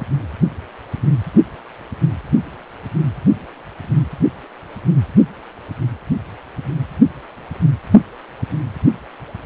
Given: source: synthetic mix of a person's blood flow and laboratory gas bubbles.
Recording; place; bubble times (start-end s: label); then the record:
Doppler ultrasound of blood flow; precordium
no bubbles
From the record:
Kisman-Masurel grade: 000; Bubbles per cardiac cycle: 0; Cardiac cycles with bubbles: 0%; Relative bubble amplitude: no bubbles discernible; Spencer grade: 0 (complete lack of bubble signals)